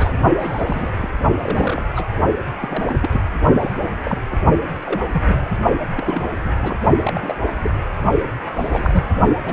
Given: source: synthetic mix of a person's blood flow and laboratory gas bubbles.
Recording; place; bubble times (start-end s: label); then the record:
Doppler ultrasound of blood flow; precordium
0.00-0.15 s: bubbles
0.38-0.91 s: bubbles
0.97-1.10 s: bubbles
1.39-1.87 s: bubbles
1.95-2.04 s: bubbles
2.62-2.94 s: bubbles
3.00-3.22 s: bubbles
3.59-3.72 s: bubbles
4.03-4.19 s: bubbles
4.28-4.38 s: bubbles
4.73-5.49 s: bubbles
5.95-6.29 s: bubbles
6.37-6.51 s: bubbles
6.61-6.77 s: bubbles
7.03-7.36 s: bubbles
7.46-7.54 s: bubbles
7.60-7.80 s: bubbles
8.54-9.05 s: bubbles
9.45-9.52 s: bubbles
From the record:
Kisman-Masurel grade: 242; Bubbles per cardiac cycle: several, 3 to 8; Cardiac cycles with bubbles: 100%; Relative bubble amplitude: moderate (0.250 to 0.450); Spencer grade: 3 (all of the cardiac periods contain showers or single bubble signals, but not dominating or overriding the cardiac motion signals); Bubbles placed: only in the low amplitude regions of the cardiac cycle